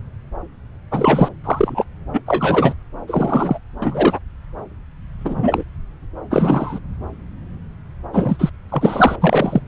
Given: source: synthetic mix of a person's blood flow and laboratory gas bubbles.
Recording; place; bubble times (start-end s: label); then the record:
Doppler ultrasound of blood flow; subclavian vein
0.91-1.28 s: bubbles
1.44-1.84 s: bubbles
2.13-2.22 s: bubbles
2.26-2.74 s: bubbles
3.08-3.59 s: bubbles
3.82-4.19 s: bubbles
5.21-5.64 s: bubbles
6.30-6.79 s: bubbles
8.12-8.50 s: bubbles
8.69-9.16 s: bubbles
9.21-9.61 s: bubbles
From the record:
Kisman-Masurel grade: 233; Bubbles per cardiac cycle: several, 3 to 8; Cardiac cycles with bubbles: 50 to 99%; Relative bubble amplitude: loud (0.450 to 0.775); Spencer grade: 3 (all of the cardiac periods contain showers or single bubble signals, but not dominating or overriding the cardiac motion signals); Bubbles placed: anywhere in the cardiac cycle